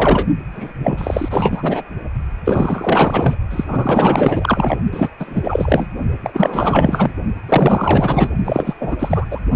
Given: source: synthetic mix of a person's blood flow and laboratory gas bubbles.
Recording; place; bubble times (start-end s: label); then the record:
Doppler ultrasound of blood flow; precordium
0.00-0.26 s: bubbles
0.53-0.72 s: bubbles
0.78-1.82 s: bubbles
2.45-3.36 s: bubbles
3.50-3.64 s: bubbles
3.68-4.77 s: bubbles
4.92-5.08 s: bubbles
5.18-5.86 s: bubbles
6.22-7.11 s: bubbles
7.48-8.30 s: bubbles
8.45-8.74 s: bubbles
8.80-9.25 s: bubbles
9.30-9.40 s: bubbles
From the record:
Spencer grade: 4 (maximum detectable bubble signal sounding continuously throughout systole and diastole of every cardiac period, and overriding the amplitude of the normal cardiac signals); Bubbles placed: only in the low amplitude regions of the cardiac cycle